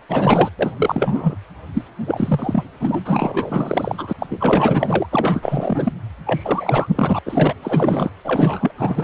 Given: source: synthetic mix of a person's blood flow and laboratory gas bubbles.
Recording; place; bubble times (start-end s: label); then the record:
Doppler ultrasound of blood flow; precordium
0.09-0.50 s: bubbles
0.59-0.72 s: bubbles
0.77-1.36 s: bubbles
1.73-1.83 s: bubbles
2.06-2.64 s: bubbles
2.79-3.00 s: bubbles
3.04-4.13 s: bubbles
4.18-4.26 s: bubbles
4.30-5.07 s: bubbles
5.12-5.92 s: bubbles
6.25-7.19 s: bubbles
7.25-7.54 s: bubbles
7.62-8.10 s: bubbles
8.24-8.72 s: bubbles
8.78-9.04 s: bubbles
From the record:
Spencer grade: 4 (maximum detectable bubble signal sounding continuously throughout systole and diastole of every cardiac period, and overriding the amplitude of the normal cardiac signals); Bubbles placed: anywhere in the cardiac cycle